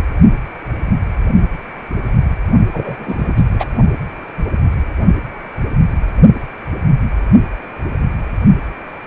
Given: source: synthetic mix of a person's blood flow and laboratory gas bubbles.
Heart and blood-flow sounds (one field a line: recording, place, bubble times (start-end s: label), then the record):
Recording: Doppler ultrasound of blood flow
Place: precordium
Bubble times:
2.73-2.96 s: bubbles
2.98-3.33 s: bubbles
3.36-3.43 s: bubbles
3.52-3.65 s: bubbles
From the record:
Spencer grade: 1 (occasional bubble signal discernible with the cardiac motion signal, with majority of cardiac periods free of bubbles)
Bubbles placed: only in the low amplitude regions of the cardiac cycle